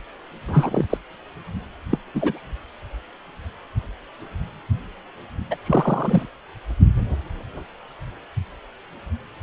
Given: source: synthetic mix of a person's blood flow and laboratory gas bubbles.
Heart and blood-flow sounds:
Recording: Doppler ultrasound of blood flow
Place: precordium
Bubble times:
0.48-0.85 s: bubbles
0.90-0.97 s: bubbles
1.91-1.98 s: bubbles
2.15-2.42 s: bubbles
5.50-5.56 s: bubbles
5.66-6.26 s: bubbles
From the record:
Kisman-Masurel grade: 223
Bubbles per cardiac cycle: several, 3 to 8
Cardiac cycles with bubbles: 10 to 50%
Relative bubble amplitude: loud (0.450 to 0.775)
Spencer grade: 2 (many but less than half of the cardiac periods contain bubble signals, singularly or in groups)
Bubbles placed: anywhere in the cardiac cycle

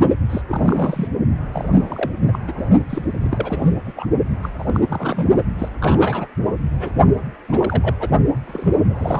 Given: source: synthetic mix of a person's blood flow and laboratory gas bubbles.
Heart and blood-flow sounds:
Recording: Doppler ultrasound of blood flow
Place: precordium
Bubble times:
0.29-0.41 s: bubbles
0.48-1.08 s: bubbles
1.53-2.12 s: bubbles
2.28-2.39 s: bubbles
2.47-2.53 s: bubbles
2.56-2.64 s: bubbles
2.90-3.67 s: bubbles
3.85-3.93 s: bubbles
3.96-4.08 s: bubbles
4.42-4.50 s: bubbles
4.58-4.80 s: bubbles
4.88-5.28 s: bubbles
5.58-5.69 s: bubbles
5.80-6.27 s: bubbles
6.79-6.91 s: bubbles
7.49-7.95 s: bubbles
7.99-8.09 s: bubbles
8.45-8.79 s: bubbles
8.88-9.20 s: bubbles
From the record:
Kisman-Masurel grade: 342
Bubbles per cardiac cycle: rolling drumbeat, 9 or more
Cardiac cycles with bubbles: 100%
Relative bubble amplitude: moderate (0.250 to 0.450)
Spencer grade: 3 (all of the cardiac periods contain showers or single bubble signals, but not dominating or overriding the cardiac motion signals)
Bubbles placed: only in the low amplitude regions of the cardiac cycle

